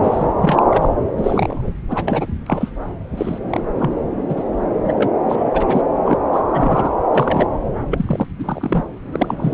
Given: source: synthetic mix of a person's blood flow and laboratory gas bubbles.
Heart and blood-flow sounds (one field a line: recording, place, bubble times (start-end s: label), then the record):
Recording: Doppler ultrasound of blood flow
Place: subclavian vein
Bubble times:
0.02-0.26 s: bubbles
0.41-0.64 s: bubbles
0.69-0.88 s: bubbles
1.17-1.72 s: bubbles
1.89-2.27 s: bubbles
2.46-2.71 s: bubbles
3.17-3.39 s: bubbles
3.50-3.63 s: bubbles
3.79-3.91 s: bubbles
4.29-4.44 s: bubbles
4.54-4.55 s: bubbles
4.83-5.09 s: bubbles
5.28-5.82 s: bubbles
6.04-6.17 s: bubbles
6.33-6.42 s: bubbles
6.54-6.92 s: bubbles
7.13-7.46 s: bubbles
7.90-8.27 s: bubbles
8.38-8.84 s: bubbles
9.11-9.54 s: bubbles
From the record:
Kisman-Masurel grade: 243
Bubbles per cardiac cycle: several, 3 to 8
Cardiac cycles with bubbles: 100%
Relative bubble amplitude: loud (0.450 to 0.775)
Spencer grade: 3 (all of the cardiac periods contain showers or single bubble signals, but not dominating or overriding the cardiac motion signals)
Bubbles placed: anywhere in the cardiac cycle